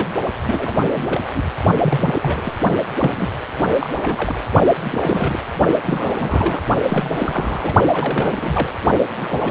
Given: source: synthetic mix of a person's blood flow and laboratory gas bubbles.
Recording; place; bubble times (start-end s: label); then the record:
Doppler ultrasound of blood flow; precordium
0.00-0.08 s: bubbles
0.43-0.77 s: bubbles
0.95-1.21 s: bubbles
1.34-1.43 s: bubbles
1.81-2.60 s: bubbles
2.99-3.28 s: bubbles
3.63-3.71 s: bubbles
3.79-4.35 s: bubbles
4.83-5.40 s: bubbles
5.84-6.62 s: bubbles
6.85-7.74 s: bubbles
7.92-8.71 s: bubbles
9.16-9.50 s: bubbles
From the record:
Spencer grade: 3 (all of the cardiac periods contain showers or single bubble signals, but not dominating or overriding the cardiac motion signals); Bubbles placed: only in the low amplitude regions of the cardiac cycle